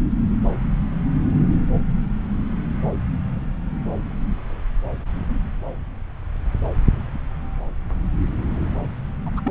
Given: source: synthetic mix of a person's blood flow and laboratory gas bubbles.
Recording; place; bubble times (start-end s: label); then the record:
Doppler ultrasound of blood flow; subclavian vein
9.25-9.40 s: bubbles
9.43-9.51 s: bubbles
From the record:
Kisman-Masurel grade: 211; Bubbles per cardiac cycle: several, 3 to 8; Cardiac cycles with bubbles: 1 to 10%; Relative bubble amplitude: barely perceptible (0.100 to 0.250); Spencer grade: 1 (occasional bubble signal discernible with the cardiac motion signal, with majority of cardiac periods free of bubbles); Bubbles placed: anywhere in the cardiac cycle